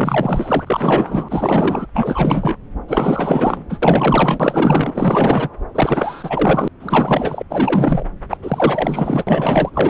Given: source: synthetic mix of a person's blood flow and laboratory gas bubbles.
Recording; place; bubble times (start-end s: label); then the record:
Doppler ultrasound of blood flow; subclavian vein
0.00-0.64 s: bubbles
0.66-1.86 s: bubbles
1.94-2.57 s: bubbles
2.88-3.65 s: bubbles
3.69-3.80 s: bubbles
3.82-5.49 s: bubbles
5.75-6.68 s: bubbles
6.79-7.42 s: bubbles
7.50-8.04 s: bubbles
8.29-8.38 s: bubbles
8.42-9.24 s: bubbles
9.27-9.70 s: bubbles
9.73-9.90 s: bubbles
From the record:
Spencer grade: 4 (maximum detectable bubble signal sounding continuously throughout systole and diastole of every cardiac period, and overriding the amplitude of the normal cardiac signals); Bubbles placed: anywhere in the cardiac cycle